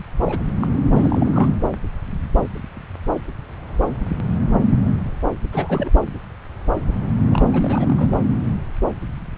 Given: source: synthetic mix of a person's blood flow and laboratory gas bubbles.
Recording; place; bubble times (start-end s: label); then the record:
Doppler ultrasound of blood flow; subclavian vein
0.24-0.39 s: bubbles
0.61-0.68 s: bubbles
0.94-1.50 s: bubbles
5.52-5.90 s: bubbles
7.32-7.46 s: bubbles
7.53-8.10 s: bubbles
From the record:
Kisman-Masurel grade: 221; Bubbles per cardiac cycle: several, 3 to 8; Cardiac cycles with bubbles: 10 to 50%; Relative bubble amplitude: barely perceptible (0.100 to 0.250); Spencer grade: 2 (many but less than half of the cardiac periods contain bubble signals, singularly or in groups); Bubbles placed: anywhere in the cardiac cycle